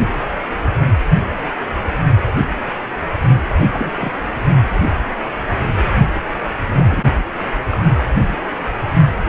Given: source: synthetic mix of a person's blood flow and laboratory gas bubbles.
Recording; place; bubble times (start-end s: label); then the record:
Doppler ultrasound of blood flow; precordium
3.72-3.92 s: bubbles
4.00-4.11 s: bubbles
6.77-7.25 s: bubbles
7.68-7.86 s: bubbles
From the record:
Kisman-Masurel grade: 221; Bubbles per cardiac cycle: several, 3 to 8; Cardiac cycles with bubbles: 10 to 50%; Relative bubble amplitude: barely perceptible (0.100 to 0.250); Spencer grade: 2 (many but less than half of the cardiac periods contain bubble signals, singularly or in groups); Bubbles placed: anywhere in the cardiac cycle